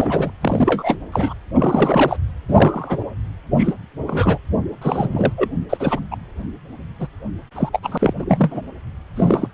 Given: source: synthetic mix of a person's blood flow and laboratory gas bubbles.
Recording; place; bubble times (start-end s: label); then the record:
Doppler ultrasound of blood flow; precordium
0.00-0.30 s: bubbles
0.41-0.96 s: bubbles
1.12-1.33 s: bubbles
1.56-2.17 s: bubbles
2.48-3.04 s: bubbles
3.56-3.74 s: bubbles
4.07-4.38 s: bubbles
4.82-5.33 s: bubbles
5.37-5.48 s: bubbles
5.69-6.00 s: bubbles
6.11-6.16 s: bubbles
7.00-7.08 s: bubbles
7.55-7.70 s: bubbles
7.73-7.79 s: bubbles
7.83-7.98 s: bubbles
8.00-8.13 s: bubbles
8.16-8.61 s: bubbles
9.16-9.48 s: bubbles
From the record:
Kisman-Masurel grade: 242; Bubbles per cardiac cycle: several, 3 to 8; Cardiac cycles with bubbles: 100%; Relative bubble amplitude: moderate (0.250 to 0.450); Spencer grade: 3 (all of the cardiac periods contain showers or single bubble signals, but not dominating or overriding the cardiac motion signals); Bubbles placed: anywhere in the cardiac cycle